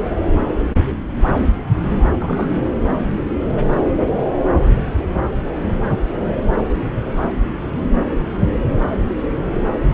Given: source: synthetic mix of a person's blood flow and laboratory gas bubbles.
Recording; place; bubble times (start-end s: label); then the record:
Doppler ultrasound of blood flow; subclavian vein
2.19-2.48 s: bubbles
From the record:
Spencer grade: 1 (occasional bubble signal discernible with the cardiac motion signal, with majority of cardiac periods free of bubbles); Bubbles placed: anywhere in the cardiac cycle